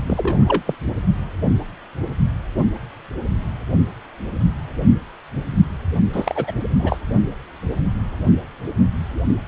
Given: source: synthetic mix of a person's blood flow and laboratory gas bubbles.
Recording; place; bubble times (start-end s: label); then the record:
Doppler ultrasound of blood flow; precordium
0.07-0.62 s: bubbles
0.67-0.75 s: bubbles
6.12-6.52 s: bubbles
6.79-6.97 s: bubbles
From the record:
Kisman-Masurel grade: 222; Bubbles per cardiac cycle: several, 3 to 8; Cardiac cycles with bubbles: 10 to 50%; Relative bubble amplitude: moderate (0.250 to 0.450); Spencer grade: 2 (many but less than half of the cardiac periods contain bubble signals, singularly or in groups); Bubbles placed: only in the low amplitude regions of the cardiac cycle